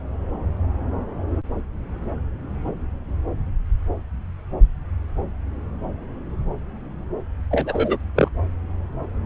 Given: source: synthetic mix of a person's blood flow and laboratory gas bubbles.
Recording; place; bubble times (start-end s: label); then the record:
Doppler ultrasound of blood flow; subclavian vein
7.50-7.97 s: bubbles
8.15-8.28 s: bubbles
From the record:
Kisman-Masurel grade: 112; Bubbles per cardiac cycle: 1 to 2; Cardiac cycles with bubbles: 1 to 10%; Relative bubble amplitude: moderate (0.250 to 0.450); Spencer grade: 1 (occasional bubble signal discernible with the cardiac motion signal, with majority of cardiac periods free of bubbles); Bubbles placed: anywhere in the cardiac cycle